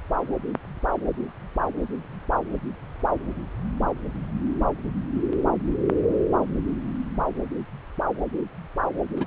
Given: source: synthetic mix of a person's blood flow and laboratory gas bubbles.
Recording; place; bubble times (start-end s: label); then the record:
Doppler ultrasound of blood flow; subclavian vein
9.16-9.27 s: bubbles
From the record:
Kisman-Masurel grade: 211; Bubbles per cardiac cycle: several, 3 to 8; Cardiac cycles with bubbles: 1 to 10%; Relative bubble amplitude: barely perceptible (0.100 to 0.250); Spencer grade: 1 (occasional bubble signal discernible with the cardiac motion signal, with majority of cardiac periods free of bubbles); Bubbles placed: anywhere in the cardiac cycle